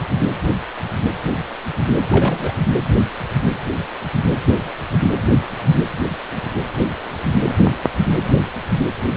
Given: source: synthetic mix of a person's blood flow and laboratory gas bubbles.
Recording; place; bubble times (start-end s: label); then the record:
Doppler ultrasound of blood flow; precordium
2.01-2.56 s: bubbles
From the record:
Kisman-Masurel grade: 212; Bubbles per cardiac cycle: several, 3 to 8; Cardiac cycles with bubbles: 1 to 10%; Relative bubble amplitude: moderate (0.250 to 0.450); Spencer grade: 1 (occasional bubble signal discernible with the cardiac motion signal, with majority of cardiac periods free of bubbles); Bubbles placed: anywhere in the cardiac cycle